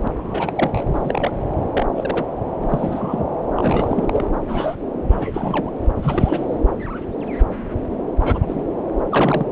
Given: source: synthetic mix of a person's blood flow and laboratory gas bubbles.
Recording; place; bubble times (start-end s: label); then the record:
Doppler ultrasound of blood flow; subclavian vein
0.00-0.07 s: bubbles
0.12-0.83 s: bubbles
0.93-1.38 s: bubbles
1.73-1.86 s: bubbles
1.95-2.25 s: bubbles
2.61-2.67 s: bubbles
2.69-3.24 s: bubbles
3.56-4.25 s: bubbles
4.44-4.75 s: bubbles
5.08-5.71 s: bubbles
5.96-6.46 s: bubbles
8.19-8.64 s: bubbles
9.10-9.45 s: bubbles
From the record:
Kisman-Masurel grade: 232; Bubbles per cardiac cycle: several, 3 to 8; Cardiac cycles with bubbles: 50 to 99%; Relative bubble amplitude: moderate (0.250 to 0.450); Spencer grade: 3 (all of the cardiac periods contain showers or single bubble signals, but not dominating or overriding the cardiac motion signals); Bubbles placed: anywhere in the cardiac cycle